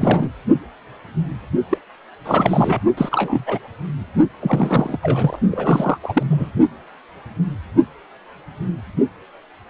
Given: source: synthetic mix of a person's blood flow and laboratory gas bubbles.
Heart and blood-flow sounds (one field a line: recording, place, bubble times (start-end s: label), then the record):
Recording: Doppler ultrasound of blood flow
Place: precordium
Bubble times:
0.00-0.28 s: bubbles
1.70-1.78 s: bubbles
2.25-2.80 s: bubbles
2.97-3.58 s: bubbles
4.41-4.99 s: bubbles
5.02-5.39 s: bubbles
5.51-5.98 s: bubbles
6.03-6.23 s: bubbles
6.30-6.49 s: bubbles
From the record:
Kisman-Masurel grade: 232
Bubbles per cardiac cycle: several, 3 to 8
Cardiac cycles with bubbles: 50 to 99%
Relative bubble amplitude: moderate (0.250 to 0.450)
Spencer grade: 3 (all of the cardiac periods contain showers or single bubble signals, but not dominating or overriding the cardiac motion signals)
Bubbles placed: only in the low amplitude regions of the cardiac cycle